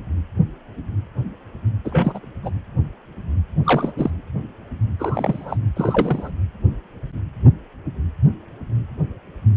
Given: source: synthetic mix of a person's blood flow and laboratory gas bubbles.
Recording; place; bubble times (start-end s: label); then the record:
Doppler ultrasound of blood flow; precordium
1.85-2.30 s: bubbles
2.42-2.50 s: bubbles
3.65-3.92 s: bubbles
3.97-4.10 s: bubbles
4.99-5.57 s: bubbles
5.76-6.32 s: bubbles
From the record:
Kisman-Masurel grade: 222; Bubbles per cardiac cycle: several, 3 to 8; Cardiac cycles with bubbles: 10 to 50%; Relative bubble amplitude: moderate (0.250 to 0.450); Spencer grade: 2 (many but less than half of the cardiac periods contain bubble signals, singularly or in groups); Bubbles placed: anywhere in the cardiac cycle